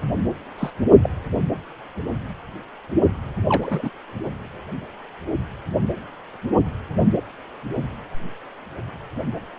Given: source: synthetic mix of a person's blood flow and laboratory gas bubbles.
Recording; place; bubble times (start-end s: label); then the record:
Doppler ultrasound of blood flow; precordium
0.57-0.70 s: bubbles
1.02-1.10 s: bubbles
3.49-3.90 s: bubbles
From the record:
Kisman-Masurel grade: 122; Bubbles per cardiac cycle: 1 to 2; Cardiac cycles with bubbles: 10 to 50%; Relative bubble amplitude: moderate (0.250 to 0.450); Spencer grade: 2 (many but less than half of the cardiac periods contain bubble signals, singularly or in groups); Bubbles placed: anywhere in the cardiac cycle